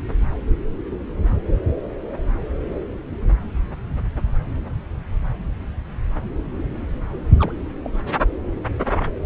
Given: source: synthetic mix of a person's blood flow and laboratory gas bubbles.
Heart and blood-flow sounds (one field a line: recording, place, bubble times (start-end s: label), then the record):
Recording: Doppler ultrasound of blood flow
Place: subclavian vein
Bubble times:
7.39-7.52 s: bubbles
7.83-7.90 s: bubbles
From the record:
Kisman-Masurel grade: 121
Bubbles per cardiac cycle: 1 to 2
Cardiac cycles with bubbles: 10 to 50%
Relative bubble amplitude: barely perceptible (0.100 to 0.250)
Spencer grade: 2 (many but less than half of the cardiac periods contain bubble signals, singularly or in groups)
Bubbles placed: anywhere in the cardiac cycle